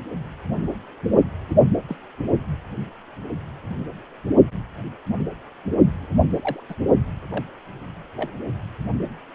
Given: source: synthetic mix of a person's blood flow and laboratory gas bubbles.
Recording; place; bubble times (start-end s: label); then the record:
Doppler ultrasound of blood flow; precordium
1.49-1.56 s: bubbles
1.88-1.96 s: bubbles
6.33-6.64 s: bubbles
6.69-6.75 s: bubbles
7.30-7.44 s: bubbles
8.17-8.31 s: bubbles
From the record:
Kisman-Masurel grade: 121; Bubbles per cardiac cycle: 1 to 2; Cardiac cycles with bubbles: 10 to 50%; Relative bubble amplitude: barely perceptible (0.100 to 0.250); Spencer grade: 2 (many but less than half of the cardiac periods contain bubble signals, singularly or in groups); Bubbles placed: only in the low amplitude regions of the cardiac cycle